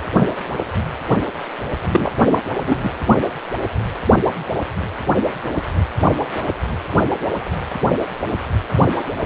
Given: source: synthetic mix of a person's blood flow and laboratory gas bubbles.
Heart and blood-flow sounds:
Doppler ultrasound of blood flow; precordium
1.91-2.12 s: bubbles
2.31-2.39 s: bubbles
2.66-2.90 s: bubbles
From the record:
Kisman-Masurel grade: 213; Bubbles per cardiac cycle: several, 3 to 8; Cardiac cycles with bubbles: 1 to 10%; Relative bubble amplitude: loud (0.450 to 0.775); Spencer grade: 1 (occasional bubble signal discernible with the cardiac motion signal, with majority of cardiac periods free of bubbles); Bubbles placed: anywhere in the cardiac cycle

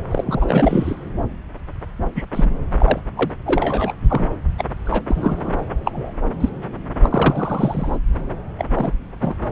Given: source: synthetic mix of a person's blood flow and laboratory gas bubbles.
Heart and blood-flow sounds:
Doppler ultrasound of blood flow; subclavian vein
0.11-0.94 s: bubbles
2.15-2.25 s: bubbles
2.32-2.51 s: bubbles
2.73-3.00 s: bubbles
3.15-3.31 s: bubbles
3.46-3.93 s: bubbles
4.10-4.28 s: bubbles
4.58-4.65 s: bubbles
4.79-4.82 s: bubbles
4.85-5.02 s: bubbles
5.08-5.54 s: bubbles
5.85-6.12 s: bubbles
6.40-6.49 s: bubbles
7.03-7.97 s: bubbles
8.59-8.65 s: bubbles
8.74-8.93 s: bubbles
9.21-9.35 s: bubbles
From the record:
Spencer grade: 3 (all of the cardiac periods contain showers or single bubble signals, but not dominating or overriding the cardiac motion signals); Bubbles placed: anywhere in the cardiac cycle

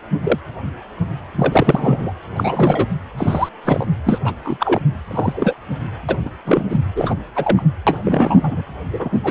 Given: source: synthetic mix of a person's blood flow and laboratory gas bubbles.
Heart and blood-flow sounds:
Doppler ultrasound of blood flow; precordium
0.23-0.39 s: bubbles
1.35-2.13 s: bubbles
2.36-2.88 s: bubbles
3.17-3.49 s: bubbles
3.64-3.88 s: bubbles
4.05-4.18 s: bubbles
4.24-4.34 s: bubbles
4.43-4.81 s: bubbles
5.10-5.54 s: bubbles
6.08-6.17 s: bubbles
6.25-6.30 s: bubbles
6.45-6.64 s: bubbles
6.69-6.81 s: bubbles
6.96-7.15 s: bubbles
7.35-7.62 s: bubbles
7.87-8.62 s: bubbles
8.92-9.09 s: bubbles
9.12-9.19 s: bubbles
9.23-9.31 s: bubbles
From the record:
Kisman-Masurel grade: 233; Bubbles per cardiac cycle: several, 3 to 8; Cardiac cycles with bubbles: 50 to 99%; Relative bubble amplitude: loud (0.450 to 0.775); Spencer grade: 3 (all of the cardiac periods contain showers or single bubble signals, but not dominating or overriding the cardiac motion signals); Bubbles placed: anywhere in the cardiac cycle

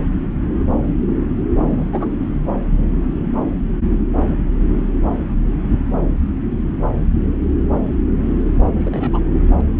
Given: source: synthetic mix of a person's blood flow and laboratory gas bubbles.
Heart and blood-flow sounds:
Doppler ultrasound of blood flow; subclavian vein
1.70-1.90 s: bubbles
1.93-2.12 s: bubbles
8.81-9.19 s: bubbles
9.61-9.65 s: bubbles
From the record:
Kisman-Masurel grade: 121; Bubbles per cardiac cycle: 1 to 2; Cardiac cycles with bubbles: 10 to 50%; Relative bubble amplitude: barely perceptible (0.100 to 0.250); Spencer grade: 2 (many but less than half of the cardiac periods contain bubble signals, singularly or in groups); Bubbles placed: anywhere in the cardiac cycle

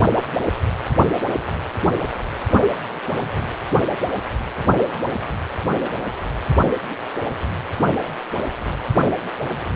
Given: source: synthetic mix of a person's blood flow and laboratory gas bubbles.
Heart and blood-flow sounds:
Doppler ultrasound of blood flow; precordium
no bubbles
From the record:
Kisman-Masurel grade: 000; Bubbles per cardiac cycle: 0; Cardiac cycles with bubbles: 0%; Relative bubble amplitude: no bubbles discernible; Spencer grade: 0 (complete lack of bubble signals)

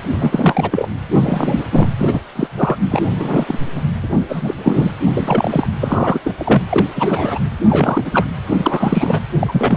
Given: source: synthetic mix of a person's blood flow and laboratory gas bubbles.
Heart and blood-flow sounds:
Doppler ultrasound of blood flow; precordium
0.12-0.89 s: bubbles
1.16-1.65 s: bubbles
1.72-1.88 s: bubbles
1.98-2.21 s: bubbles
2.35-2.47 s: bubbles
2.57-2.77 s: bubbles
2.91-3.08 s: bubbles
3.10-3.44 s: bubbles
3.48-3.58 s: bubbles
3.74-3.81 s: bubbles
4.02-4.08 s: bubbles
4.29-4.54 s: bubbles
4.57-4.92 s: bubbles
5.14-5.67 s: bubbles
5.80-6.21 s: bubbles
6.24-6.34 s: bubbles
6.37-6.62 s: bubbles
6.69-6.87 s: bubbles
6.96-7.38 s: bubbles
7.69-8.26 s: bubbles
8.57-9.20 s: bubbles
9.40-9.77 s: bubbles
From the record:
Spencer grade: 3 (all of the cardiac periods contain showers or single bubble signals, but not dominating or overriding the cardiac motion signals); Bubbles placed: anywhere in the cardiac cycle

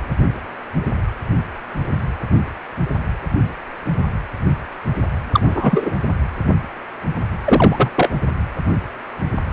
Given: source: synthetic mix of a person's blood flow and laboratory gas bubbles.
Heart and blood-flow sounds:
Doppler ultrasound of blood flow; precordium
5.32-5.94 s: bubbles
7.45-7.91 s: bubbles
7.96-8.11 s: bubbles
From the record:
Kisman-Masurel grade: 223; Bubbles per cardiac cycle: several, 3 to 8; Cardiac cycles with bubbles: 10 to 50%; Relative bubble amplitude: loud (0.450 to 0.775); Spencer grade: 2 (many but less than half of the cardiac periods contain bubble signals, singularly or in groups); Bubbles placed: anywhere in the cardiac cycle

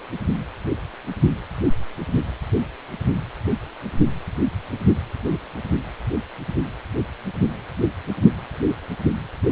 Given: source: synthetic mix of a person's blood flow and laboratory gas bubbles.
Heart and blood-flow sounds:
Doppler ultrasound of blood flow; precordium
no bubbles
From the record:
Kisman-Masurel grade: 000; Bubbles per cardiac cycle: 0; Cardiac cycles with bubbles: 0%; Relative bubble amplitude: no bubbles discernible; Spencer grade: 0 (complete lack of bubble signals)

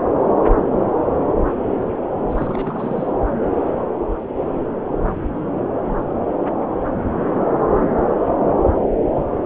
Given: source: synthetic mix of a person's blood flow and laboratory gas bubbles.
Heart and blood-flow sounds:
Doppler ultrasound of blood flow; subclavian vein
2.29-3.12 s: bubbles
From the record:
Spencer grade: 1 (occasional bubble signal discernible with the cardiac motion signal, with majority of cardiac periods free of bubbles); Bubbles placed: anywhere in the cardiac cycle

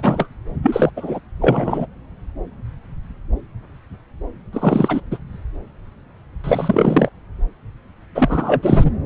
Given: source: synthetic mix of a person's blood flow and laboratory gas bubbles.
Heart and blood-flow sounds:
Doppler ultrasound of blood flow; subclavian vein
0.00-0.28 s: bubbles
0.62-0.90 s: bubbles
0.96-1.19 s: bubbles
1.41-1.86 s: bubbles
4.53-5.00 s: bubbles
5.11-5.18 s: bubbles
6.44-7.09 s: bubbles
8.15-8.91 s: bubbles
From the record:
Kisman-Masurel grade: 333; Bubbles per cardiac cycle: rolling drumbeat, 9 or more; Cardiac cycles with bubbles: 50 to 99%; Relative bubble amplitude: loud (0.450 to 0.775); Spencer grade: 3 (all of the cardiac periods contain showers or single bubble signals, but not dominating or overriding the cardiac motion signals); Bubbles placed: anywhere in the cardiac cycle

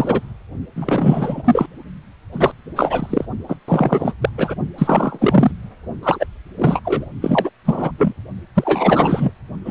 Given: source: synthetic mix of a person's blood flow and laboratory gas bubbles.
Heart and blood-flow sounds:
Doppler ultrasound of blood flow; precordium
0.00-0.20 s: bubbles
0.76-1.67 s: bubbles
2.33-2.52 s: bubbles
2.75-3.26 s: bubbles
3.48-3.56 s: bubbles
3.68-4.12 s: bubbles
4.21-4.29 s: bubbles
4.38-4.54 s: bubbles
4.78-5.51 s: bubbles
6.03-6.26 s: bubbles
6.57-6.81 s: bubbles
6.84-7.05 s: bubbles
7.21-7.50 s: bubbles
7.65-7.91 s: bubbles
7.98-8.13 s: bubbles
8.54-9.32 s: bubbles
9.65-9.71 s: bubbles
From the record:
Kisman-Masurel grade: 343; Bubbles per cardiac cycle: rolling drumbeat, 9 or more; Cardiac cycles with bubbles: 100%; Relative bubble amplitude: loud (0.450 to 0.775); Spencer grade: 3 (all of the cardiac periods contain showers or single bubble signals, but not dominating or overriding the cardiac motion signals); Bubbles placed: only in the low amplitude regions of the cardiac cycle

